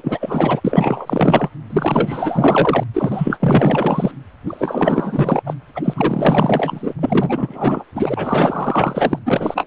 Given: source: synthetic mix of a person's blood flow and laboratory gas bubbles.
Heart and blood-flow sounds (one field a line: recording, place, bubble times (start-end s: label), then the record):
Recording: Doppler ultrasound of blood flow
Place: precordium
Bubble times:
0.00-0.61 s: bubbles
0.64-1.50 s: bubbles
1.70-2.83 s: bubbles
2.94-4.12 s: bubbles
4.46-5.42 s: bubbles
5.46-5.54 s: bubbles
5.75-6.94 s: bubbles
6.99-7.84 s: bubbles
7.95-9.19 s: bubbles
9.26-9.67 s: bubbles
From the record:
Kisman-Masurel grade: 444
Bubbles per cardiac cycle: continuous sound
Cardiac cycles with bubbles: 100%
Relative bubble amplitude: maximal (0.775 to 0.999)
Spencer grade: 4 (maximum detectable bubble signal sounding continuously throughout systole and diastole of every cardiac period, and overriding the amplitude of the normal cardiac signals)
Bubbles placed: anywhere in the cardiac cycle